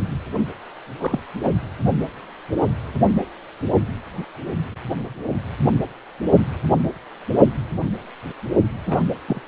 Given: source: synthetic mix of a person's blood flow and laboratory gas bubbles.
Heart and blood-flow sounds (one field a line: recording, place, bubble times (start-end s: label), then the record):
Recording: Doppler ultrasound of blood flow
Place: precordium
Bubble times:
0.99-1.21 s: bubbles
1.43-1.50 s: bubbles
8.86-9.03 s: bubbles
9.27-9.41 s: bubbles
From the record:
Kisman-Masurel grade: 122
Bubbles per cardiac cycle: 1 to 2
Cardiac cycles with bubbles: 10 to 50%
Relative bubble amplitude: moderate (0.250 to 0.450)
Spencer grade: 2 (many but less than half of the cardiac periods contain bubble signals, singularly or in groups)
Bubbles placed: only in the low amplitude regions of the cardiac cycle